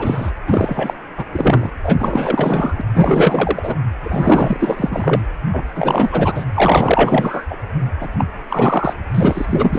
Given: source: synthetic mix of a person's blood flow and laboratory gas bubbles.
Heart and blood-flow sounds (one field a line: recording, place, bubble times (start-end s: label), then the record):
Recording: Doppler ultrasound of blood flow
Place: precordium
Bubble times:
0.00-0.32 s: bubbles
0.47-0.93 s: bubbles
1.17-1.24 s: bubbles
1.32-1.70 s: bubbles
1.84-1.97 s: bubbles
1.99-2.81 s: bubbles
2.94-3.75 s: bubbles
4.03-5.22 s: bubbles
5.52-5.63 s: bubbles
5.74-6.45 s: bubbles
6.54-7.46 s: bubbles
7.49-7.57 s: bubbles
8.01-8.09 s: bubbles
8.19-8.26 s: bubbles
8.49-8.95 s: bubbles
9.14-9.79 s: bubbles
From the record:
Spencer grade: 4 (maximum detectable bubble signal sounding continuously throughout systole and diastole of every cardiac period, and overriding the amplitude of the normal cardiac signals)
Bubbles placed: anywhere in the cardiac cycle